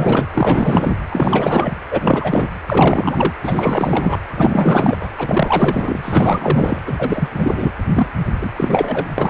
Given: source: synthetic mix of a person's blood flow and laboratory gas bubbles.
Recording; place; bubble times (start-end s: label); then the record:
Doppler ultrasound of blood flow; precordium
0.00-0.26 s: bubbles
0.34-0.97 s: bubbles
1.12-1.77 s: bubbles
1.90-2.49 s: bubbles
2.67-3.34 s: bubbles
3.43-4.18 s: bubbles
4.35-4.96 s: bubbles
5.00-5.08 s: bubbles
5.17-6.82 s: bubbles
6.87-7.29 s: bubbles
7.33-7.71 s: bubbles
7.93-8.07 s: bubbles
8.42-8.49 s: bubbles
8.56-9.05 s: bubbles
9.18-9.30 s: bubbles
From the record:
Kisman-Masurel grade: 444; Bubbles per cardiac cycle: continuous sound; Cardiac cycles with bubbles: 100%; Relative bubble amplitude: maximal (0.775 to 0.999); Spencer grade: 4 (maximum detectable bubble signal sounding continuously throughout systole and diastole of every cardiac period, and overriding the amplitude of the normal cardiac signals); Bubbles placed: anywhere in the cardiac cycle